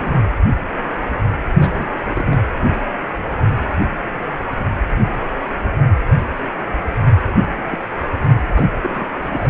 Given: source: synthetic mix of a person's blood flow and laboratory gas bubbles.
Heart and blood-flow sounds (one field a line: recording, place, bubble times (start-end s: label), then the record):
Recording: Doppler ultrasound of blood flow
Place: precordium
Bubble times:
0.00-0.17 s: bubbles
1.58-1.88 s: bubbles
2.06-2.39 s: bubbles
7.35-7.50 s: bubbles
7.57-7.63 s: bubbles
7.71-7.79 s: bubbles
8.03-8.08 s: bubbles
8.53-8.67 s: bubbles
8.82-9.04 s: bubbles
9.22-9.50 s: bubbles
From the record:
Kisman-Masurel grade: 221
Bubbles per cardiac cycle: several, 3 to 8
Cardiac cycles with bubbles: 10 to 50%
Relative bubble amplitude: barely perceptible (0.100 to 0.250)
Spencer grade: 2 (many but less than half of the cardiac periods contain bubble signals, singularly or in groups)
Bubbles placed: anywhere in the cardiac cycle